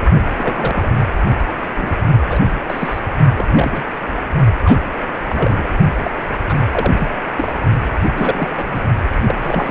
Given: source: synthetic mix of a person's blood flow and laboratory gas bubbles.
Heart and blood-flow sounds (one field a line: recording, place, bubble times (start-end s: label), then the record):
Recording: Doppler ultrasound of blood flow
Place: precordium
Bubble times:
0.38-0.91 s: bubbles
1.39-1.42 s: bubbles
1.76-1.96 s: bubbles
2.29-2.42 s: bubbles
2.69-3.00 s: bubbles
3.36-3.44 s: bubbles
3.54-3.83 s: bubbles
4.64-4.83 s: bubbles
5.29-5.70 s: bubbles
6.03-6.11 s: bubbles
6.49-6.55 s: bubbles
6.71-7.16 s: bubbles
7.37-7.52 s: bubbles
8.14-8.49 s: bubbles
8.55-8.65 s: bubbles
8.69-8.80 s: bubbles
9.26-9.35 s: bubbles
9.43-9.71 s: bubbles
From the record:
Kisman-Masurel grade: 242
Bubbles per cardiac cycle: several, 3 to 8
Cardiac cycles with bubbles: 100%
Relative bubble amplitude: moderate (0.250 to 0.450)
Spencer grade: 3 (all of the cardiac periods contain showers or single bubble signals, but not dominating or overriding the cardiac motion signals)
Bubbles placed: only in the low amplitude regions of the cardiac cycle